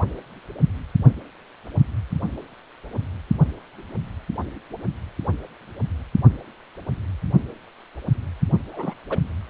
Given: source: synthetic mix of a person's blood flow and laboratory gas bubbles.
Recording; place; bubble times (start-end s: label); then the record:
Doppler ultrasound of blood flow; precordium
8.71-8.94 s: bubbles
9.10-9.19 s: bubbles
From the record:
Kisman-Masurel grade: 212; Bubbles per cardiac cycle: several, 3 to 8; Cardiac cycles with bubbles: 1 to 10%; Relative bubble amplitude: moderate (0.250 to 0.450); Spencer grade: 1 (occasional bubble signal discernible with the cardiac motion signal, with majority of cardiac periods free of bubbles); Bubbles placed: only in the low amplitude regions of the cardiac cycle